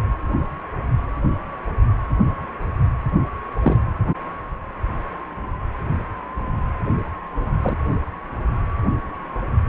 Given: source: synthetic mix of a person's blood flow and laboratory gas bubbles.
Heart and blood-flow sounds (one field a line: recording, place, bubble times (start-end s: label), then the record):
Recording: Doppler ultrasound of blood flow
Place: precordium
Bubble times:
3.61-3.77 s: bubbles
7.62-7.78 s: bubbles
From the record:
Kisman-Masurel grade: 123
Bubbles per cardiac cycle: 1 to 2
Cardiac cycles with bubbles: 10 to 50%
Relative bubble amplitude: loud (0.450 to 0.775)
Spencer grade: 2 (many but less than half of the cardiac periods contain bubble signals, singularly or in groups)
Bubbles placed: anywhere in the cardiac cycle